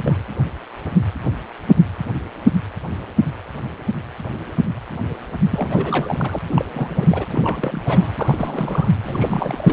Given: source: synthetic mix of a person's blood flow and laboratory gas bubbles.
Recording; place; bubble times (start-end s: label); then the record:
Doppler ultrasound of blood flow; precordium
0.04-0.17 s: bubbles
5.42-6.38 s: bubbles
6.49-6.65 s: bubbles
6.68-7.25 s: bubbles
7.32-7.82 s: bubbles
7.85-8.88 s: bubbles
9.02-9.72 s: bubbles
From the record:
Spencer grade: 3 (all of the cardiac periods contain showers or single bubble signals, but not dominating or overriding the cardiac motion signals); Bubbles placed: anywhere in the cardiac cycle